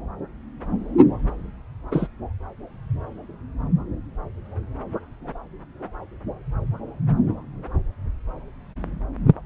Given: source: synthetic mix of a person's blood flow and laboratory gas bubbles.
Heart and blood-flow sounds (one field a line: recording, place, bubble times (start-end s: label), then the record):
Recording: Doppler ultrasound of blood flow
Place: subclavian vein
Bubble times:
1.91-2.08 s: bubbles
From the record:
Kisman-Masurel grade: 112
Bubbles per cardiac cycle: 1 to 2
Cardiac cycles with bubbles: 1 to 10%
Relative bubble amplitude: moderate (0.250 to 0.450)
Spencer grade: 1 (occasional bubble signal discernible with the cardiac motion signal, with majority of cardiac periods free of bubbles)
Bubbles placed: anywhere in the cardiac cycle